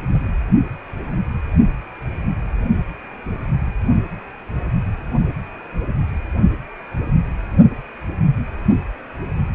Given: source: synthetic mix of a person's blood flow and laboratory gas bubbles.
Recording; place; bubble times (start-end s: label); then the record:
Doppler ultrasound of blood flow; precordium
0.14-0.19 s: bubbles
From the record:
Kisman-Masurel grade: 111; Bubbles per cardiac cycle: 1 to 2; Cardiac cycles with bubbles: 1 to 10%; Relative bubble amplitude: barely perceptible (0.100 to 0.250); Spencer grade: 1 (occasional bubble signal discernible with the cardiac motion signal, with majority of cardiac periods free of bubbles); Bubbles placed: only in the low amplitude regions of the cardiac cycle